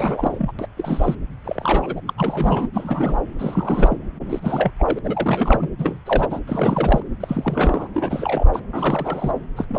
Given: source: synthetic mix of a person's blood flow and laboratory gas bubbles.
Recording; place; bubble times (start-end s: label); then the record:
Doppler ultrasound of blood flow; subclavian vein
0.00-0.52 s: bubbles
0.58-0.67 s: bubbles
0.77-1.15 s: bubbles
1.44-2.01 s: bubbles
2.07-2.14 s: bubbles
2.17-2.68 s: bubbles
2.74-3.18 s: bubbles
3.39-3.97 s: bubbles
4.29-4.40 s: bubbles
4.42-4.71 s: bubbles
4.78-4.99 s: bubbles
5.04-5.68 s: bubbles
5.78-5.97 s: bubbles
6.05-6.40 s: bubbles
6.47-7.02 s: bubbles
7.20-7.88 s: bubbles
7.94-8.49 s: bubbles
8.53-8.60 s: bubbles
8.73-9.32 s: bubbles
9.57-9.65 s: bubbles
9.69-9.79 s: bubbles
From the record:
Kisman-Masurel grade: 342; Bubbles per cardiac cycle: rolling drumbeat, 9 or more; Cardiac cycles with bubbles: 100%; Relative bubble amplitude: moderate (0.250 to 0.450); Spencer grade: 3 (all of the cardiac periods contain showers or single bubble signals, but not dominating or overriding the cardiac motion signals); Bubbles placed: anywhere in the cardiac cycle